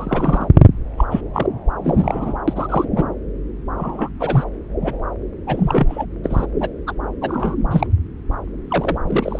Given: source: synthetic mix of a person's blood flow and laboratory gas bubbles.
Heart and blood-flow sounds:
Doppler ultrasound of blood flow; subclavian vein
0.00-0.48 s: bubbles
0.97-1.04 s: bubbles
1.11-1.21 s: bubbles
1.33-1.46 s: bubbles
1.83-2.38 s: bubbles
2.48-2.85 s: bubbles
2.96-3.04 s: bubbles
3.77-4.09 s: bubbles
4.20-4.44 s: bubbles
4.82-4.96 s: bubbles
5.46-6.05 s: bubbles
6.24-6.46 s: bubbles
6.60-6.69 s: bubbles
6.87-6.92 s: bubbles
7.21-7.55 s: bubbles
7.71-7.86 s: bubbles
8.70-8.97 s: bubbles
9.07-9.40 s: bubbles
From the record:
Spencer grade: 3 (all of the cardiac periods contain showers or single bubble signals, but not dominating or overriding the cardiac motion signals); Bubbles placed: anywhere in the cardiac cycle

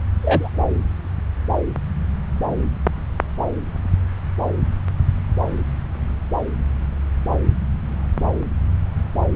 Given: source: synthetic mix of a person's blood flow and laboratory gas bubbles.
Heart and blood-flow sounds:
Doppler ultrasound of blood flow; subclavian vein
0.22-0.50 s: bubbles
From the record:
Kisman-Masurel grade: 113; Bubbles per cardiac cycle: 1 to 2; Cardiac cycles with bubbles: 1 to 10%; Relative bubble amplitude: loud (0.450 to 0.775); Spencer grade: 1 (occasional bubble signal discernible with the cardiac motion signal, with majority of cardiac periods free of bubbles); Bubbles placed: anywhere in the cardiac cycle

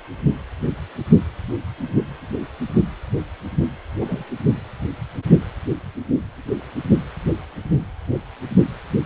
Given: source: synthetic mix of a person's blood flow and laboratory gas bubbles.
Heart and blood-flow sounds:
Doppler ultrasound of blood flow; precordium
4.00-4.25 s: bubbles
From the record:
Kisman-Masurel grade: 121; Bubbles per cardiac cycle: 1 to 2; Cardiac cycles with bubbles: 10 to 50%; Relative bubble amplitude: barely perceptible (0.100 to 0.250); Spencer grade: 2 (many but less than half of the cardiac periods contain bubble signals, singularly or in groups); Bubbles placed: anywhere in the cardiac cycle

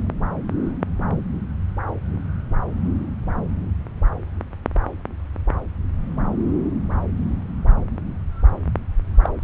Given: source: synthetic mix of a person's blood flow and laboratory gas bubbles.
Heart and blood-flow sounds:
Doppler ultrasound of blood flow; subclavian vein
9.23-9.29 s: bubbles
From the record:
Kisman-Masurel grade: 112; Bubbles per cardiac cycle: 1 to 2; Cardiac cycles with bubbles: 1 to 10%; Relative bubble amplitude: moderate (0.250 to 0.450); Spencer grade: 1 (occasional bubble signal discernible with the cardiac motion signal, with majority of cardiac periods free of bubbles); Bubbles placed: anywhere in the cardiac cycle

